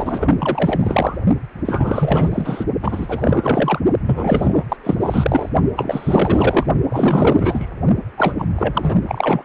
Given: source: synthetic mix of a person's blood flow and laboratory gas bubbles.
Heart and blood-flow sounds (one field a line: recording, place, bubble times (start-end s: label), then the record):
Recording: Doppler ultrasound of blood flow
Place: precordium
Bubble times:
0.00-1.18 s: bubbles
1.65-2.65 s: bubbles
2.82-3.79 s: bubbles
4.05-4.64 s: bubbles
4.69-4.76 s: bubbles
4.83-5.49 s: bubbles
5.76-6.67 s: bubbles
6.88-7.67 s: bubbles
8.17-8.35 s: bubbles
8.38-8.46 s: bubbles
8.56-9.01 s: bubbles
9.08-9.43 s: bubbles
From the record:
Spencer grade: 4 (maximum detectable bubble signal sounding continuously throughout systole and diastole of every cardiac period, and overriding the amplitude of the normal cardiac signals)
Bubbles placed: only in the low amplitude regions of the cardiac cycle